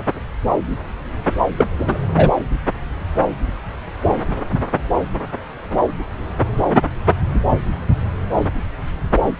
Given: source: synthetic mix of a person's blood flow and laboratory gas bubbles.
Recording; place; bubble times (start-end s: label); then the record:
Doppler ultrasound of blood flow; subclavian vein
1.56-1.65 s: bubbles
1.78-1.98 s: bubbles
2.16-2.32 s: bubbles
From the record:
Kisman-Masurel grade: 213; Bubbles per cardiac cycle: several, 3 to 8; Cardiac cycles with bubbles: 1 to 10%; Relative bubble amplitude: loud (0.450 to 0.775); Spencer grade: 1 (occasional bubble signal discernible with the cardiac motion signal, with majority of cardiac periods free of bubbles); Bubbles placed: anywhere in the cardiac cycle